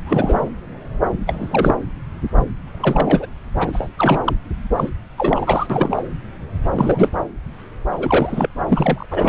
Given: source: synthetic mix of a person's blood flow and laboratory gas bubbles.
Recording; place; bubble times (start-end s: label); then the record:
Doppler ultrasound of blood flow; subclavian vein
0.06-0.50 s: bubbles
1.27-1.74 s: bubbles
2.65-3.26 s: bubbles
3.59-3.88 s: bubbles
3.97-4.36 s: bubbles
4.76-4.89 s: bubbles
5.17-5.67 s: bubbles
5.70-6.02 s: bubbles
6.71-7.09 s: bubbles
7.91-8.49 s: bubbles
8.68-9.06 s: bubbles
9.10-9.29 s: bubbles
From the record:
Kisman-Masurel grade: 333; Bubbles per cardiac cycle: rolling drumbeat, 9 or more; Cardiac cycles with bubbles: 50 to 99%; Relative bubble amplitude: loud (0.450 to 0.775); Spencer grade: 3 (all of the cardiac periods contain showers or single bubble signals, but not dominating or overriding the cardiac motion signals); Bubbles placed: anywhere in the cardiac cycle